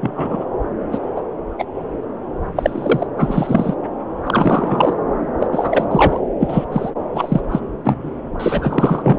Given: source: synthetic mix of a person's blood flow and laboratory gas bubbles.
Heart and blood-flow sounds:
Doppler ultrasound of blood flow; subclavian vein
0.00-0.46 s: bubbles
0.92-0.99 s: bubbles
1.16-1.21 s: bubbles
1.59-1.64 s: bubbles
2.55-3.07 s: bubbles
3.17-3.76 s: bubbles
4.25-4.93 s: bubbles
5.39-5.48 s: bubbles
5.52-5.87 s: bubbles
5.90-6.21 s: bubbles
6.39-6.64 s: bubbles
6.72-6.90 s: bubbles
7.13-7.41 s: bubbles
7.51-7.60 s: bubbles
7.85-8.11 s: bubbles
8.39-9.19 s: bubbles
From the record:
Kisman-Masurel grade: 243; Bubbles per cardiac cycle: several, 3 to 8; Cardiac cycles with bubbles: 100%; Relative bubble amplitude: loud (0.450 to 0.775); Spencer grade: 3 (all of the cardiac periods contain showers or single bubble signals, but not dominating or overriding the cardiac motion signals); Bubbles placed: anywhere in the cardiac cycle

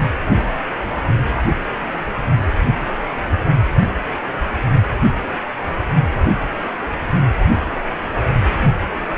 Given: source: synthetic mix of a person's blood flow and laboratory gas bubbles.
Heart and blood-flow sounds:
Doppler ultrasound of blood flow; precordium
no bubbles
From the record:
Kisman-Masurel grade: 000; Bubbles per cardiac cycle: 0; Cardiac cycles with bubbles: 0%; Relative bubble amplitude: no bubbles discernible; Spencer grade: 0 (complete lack of bubble signals)

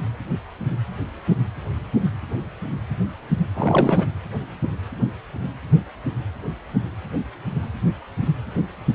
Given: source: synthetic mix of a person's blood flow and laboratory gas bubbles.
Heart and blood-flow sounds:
Doppler ultrasound of blood flow; precordium
3.55-4.06 s: bubbles
From the record:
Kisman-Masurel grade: 212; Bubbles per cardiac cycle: several, 3 to 8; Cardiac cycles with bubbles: 1 to 10%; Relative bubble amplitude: moderate (0.250 to 0.450); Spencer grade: 1 (occasional bubble signal discernible with the cardiac motion signal, with majority of cardiac periods free of bubbles); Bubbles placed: anywhere in the cardiac cycle

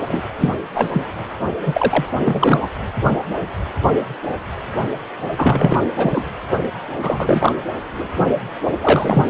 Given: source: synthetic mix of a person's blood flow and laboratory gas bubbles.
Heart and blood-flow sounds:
Doppler ultrasound of blood flow; precordium
0.08-0.23 s: bubbles
0.38-0.53 s: bubbles
0.74-1.02 s: bubbles
1.65-2.05 s: bubbles
2.18-2.69 s: bubbles
5.36-5.87 s: bubbles
5.96-6.26 s: bubbles
7.03-7.54 s: bubbles
8.81-9.29 s: bubbles
From the record:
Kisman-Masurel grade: 233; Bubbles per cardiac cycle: several, 3 to 8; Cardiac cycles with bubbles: 50 to 99%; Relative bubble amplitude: loud (0.450 to 0.775); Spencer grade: 3 (all of the cardiac periods contain showers or single bubble signals, but not dominating or overriding the cardiac motion signals); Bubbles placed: anywhere in the cardiac cycle

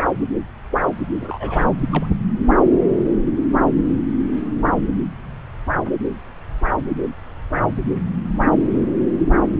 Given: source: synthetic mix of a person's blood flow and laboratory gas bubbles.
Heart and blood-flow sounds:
Doppler ultrasound of blood flow; subclavian vein
1.20-1.85 s: bubbles
1.92-2.06 s: bubbles
2.10-2.15 s: bubbles
From the record:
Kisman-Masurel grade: 211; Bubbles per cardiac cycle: several, 3 to 8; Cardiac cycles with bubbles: 1 to 10%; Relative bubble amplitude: barely perceptible (0.100 to 0.250); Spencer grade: 1 (occasional bubble signal discernible with the cardiac motion signal, with majority of cardiac periods free of bubbles); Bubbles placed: anywhere in the cardiac cycle

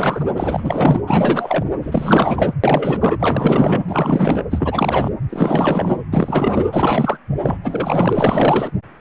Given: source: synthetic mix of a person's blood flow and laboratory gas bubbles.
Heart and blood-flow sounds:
Doppler ultrasound of blood flow; precordium
0.00-0.25 s: bubbles
0.36-1.01 s: bubbles
1.07-1.64 s: bubbles
1.82-2.54 s: bubbles
2.63-3.82 s: bubbles
3.87-4.42 s: bubbles
4.50-5.10 s: bubbles
5.29-5.96 s: bubbles
6.12-6.65 s: bubbles
6.72-7.17 s: bubbles
7.42-7.57 s: bubbles
7.64-8.71 s: bubbles
From the record:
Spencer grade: 4 (maximum detectable bubble signal sounding continuously throughout systole and diastole of every cardiac period, and overriding the amplitude of the normal cardiac signals); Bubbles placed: anywhere in the cardiac cycle

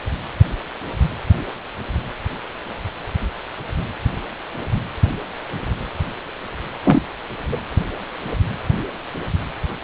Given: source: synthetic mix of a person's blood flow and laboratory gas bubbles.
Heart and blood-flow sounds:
Doppler ultrasound of blood flow; precordium
6.84-7.01 s: bubbles
7.51-7.61 s: bubbles
From the record:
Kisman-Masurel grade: 212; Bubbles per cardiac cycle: several, 3 to 8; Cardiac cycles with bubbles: 1 to 10%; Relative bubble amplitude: moderate (0.250 to 0.450); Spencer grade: 1 (occasional bubble signal discernible with the cardiac motion signal, with majority of cardiac periods free of bubbles); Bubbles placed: anywhere in the cardiac cycle

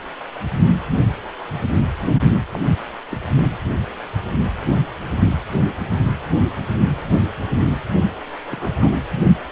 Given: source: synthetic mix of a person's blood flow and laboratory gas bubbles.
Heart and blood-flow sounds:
Doppler ultrasound of blood flow; precordium
2.54-2.60 s: bubbles
3.09-3.17 s: bubbles
8.50-8.91 s: bubbles
From the record:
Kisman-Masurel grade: 121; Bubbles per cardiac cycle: 1 to 2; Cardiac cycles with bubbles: 10 to 50%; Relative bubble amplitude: barely perceptible (0.100 to 0.250); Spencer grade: 2 (many but less than half of the cardiac periods contain bubble signals, singularly or in groups); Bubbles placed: only in the low amplitude regions of the cardiac cycle

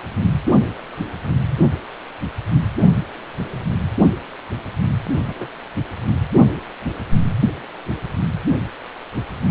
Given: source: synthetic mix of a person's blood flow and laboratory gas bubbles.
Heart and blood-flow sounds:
Doppler ultrasound of blood flow; precordium
5.28-5.50 s: bubbles
From the record:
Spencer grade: 1 (occasional bubble signal discernible with the cardiac motion signal, with majority of cardiac periods free of bubbles); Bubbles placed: only in the low amplitude regions of the cardiac cycle

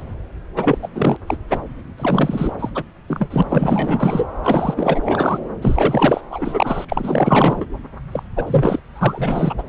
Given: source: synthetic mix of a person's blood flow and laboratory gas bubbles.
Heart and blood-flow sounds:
Doppler ultrasound of blood flow; subclavian vein
0.00-0.04 s: bubbles
0.56-0.78 s: bubbles
0.81-0.89 s: bubbles
0.95-1.17 s: bubbles
1.26-1.37 s: bubbles
1.48-1.62 s: bubbles
1.98-2.52 s: bubbles
2.59-2.69 s: bubbles
2.75-2.83 s: bubbles
3.08-3.42 s: bubbles
3.49-4.27 s: bubbles
4.43-5.38 s: bubbles
5.61-6.21 s: bubbles
6.29-6.85 s: bubbles
6.88-7.66 s: bubbles
8.12-8.23 s: bubbles
8.36-8.80 s: bubbles
8.95-9.55 s: bubbles
9.58-9.63 s: bubbles
From the record:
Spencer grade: 4 (maximum detectable bubble signal sounding continuously throughout systole and diastole of every cardiac period, and overriding the amplitude of the normal cardiac signals); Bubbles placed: anywhere in the cardiac cycle

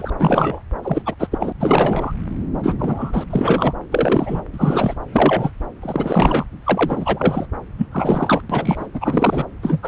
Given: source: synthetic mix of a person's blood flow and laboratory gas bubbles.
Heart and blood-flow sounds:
Doppler ultrasound of blood flow; subclavian vein
0.00-0.10 s: bubbles
0.19-0.62 s: bubbles
0.82-1.02 s: bubbles
1.06-1.15 s: bubbles
1.19-1.29 s: bubbles
1.31-1.52 s: bubbles
1.60-2.12 s: bubbles
2.63-2.75 s: bubbles
2.78-3.24 s: bubbles
3.30-3.73 s: bubbles
3.91-4.42 s: bubbles
4.52-4.95 s: bubbles
5.12-5.51 s: bubbles
5.82-6.44 s: bubbles
6.64-7.47 s: bubbles
7.77-7.87 s: bubbles
7.92-8.42 s: bubbles
8.50-8.88 s: bubbles
8.93-9.46 s: bubbles
9.62-9.79 s: bubbles
9.83-9.87 s: bubbles
From the record:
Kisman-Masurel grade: 343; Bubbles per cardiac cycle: rolling drumbeat, 9 or more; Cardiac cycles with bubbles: 100%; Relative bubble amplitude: loud (0.450 to 0.775); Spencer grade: 3 (all of the cardiac periods contain showers or single bubble signals, but not dominating or overriding the cardiac motion signals); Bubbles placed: anywhere in the cardiac cycle

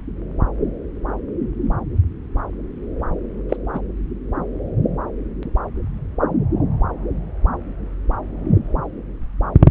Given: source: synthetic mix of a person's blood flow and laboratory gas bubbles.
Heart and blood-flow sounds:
Doppler ultrasound of blood flow; subclavian vein
3.49-3.57 s: bubbles
3.73-3.80 s: bubbles
From the record:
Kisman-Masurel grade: 113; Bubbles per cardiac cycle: 1 to 2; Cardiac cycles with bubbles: 1 to 10%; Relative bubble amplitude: loud (0.450 to 0.775); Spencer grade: 1 (occasional bubble signal discernible with the cardiac motion signal, with majority of cardiac periods free of bubbles); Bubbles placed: anywhere in the cardiac cycle

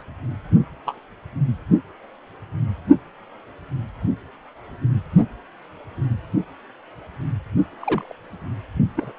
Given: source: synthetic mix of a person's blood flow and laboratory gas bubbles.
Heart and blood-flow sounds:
Doppler ultrasound of blood flow; precordium
0.00-0.02 s: bubbles
0.86-0.95 s: bubbles
7.82-8.14 s: bubbles
8.96-9.12 s: bubbles
From the record:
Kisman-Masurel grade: 122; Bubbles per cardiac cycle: 1 to 2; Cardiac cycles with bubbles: 10 to 50%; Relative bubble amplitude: moderate (0.250 to 0.450); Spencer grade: 2 (many but less than half of the cardiac periods contain bubble signals, singularly or in groups); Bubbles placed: only in the low amplitude regions of the cardiac cycle

